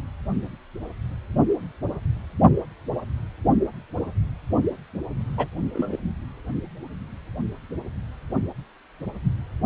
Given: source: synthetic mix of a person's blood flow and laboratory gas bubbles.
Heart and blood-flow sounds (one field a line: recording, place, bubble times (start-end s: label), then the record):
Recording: Doppler ultrasound of blood flow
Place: precordium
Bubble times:
5.37-5.48 s: bubbles
5.74-5.96 s: bubbles
From the record:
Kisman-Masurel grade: 122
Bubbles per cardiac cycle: 1 to 2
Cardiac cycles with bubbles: 10 to 50%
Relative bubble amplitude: moderate (0.250 to 0.450)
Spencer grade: 2 (many but less than half of the cardiac periods contain bubble signals, singularly or in groups)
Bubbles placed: only in the low amplitude regions of the cardiac cycle